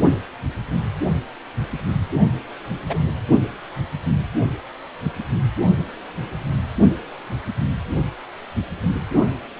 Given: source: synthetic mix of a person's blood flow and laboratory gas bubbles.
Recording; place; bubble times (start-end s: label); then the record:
Doppler ultrasound of blood flow; precordium
2.89-3.02 s: bubbles
From the record:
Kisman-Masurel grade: 112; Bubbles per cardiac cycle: 1 to 2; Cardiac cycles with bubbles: 1 to 10%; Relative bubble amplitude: moderate (0.250 to 0.450); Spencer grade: 1 (occasional bubble signal discernible with the cardiac motion signal, with majority of cardiac periods free of bubbles); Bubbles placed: only in the low amplitude regions of the cardiac cycle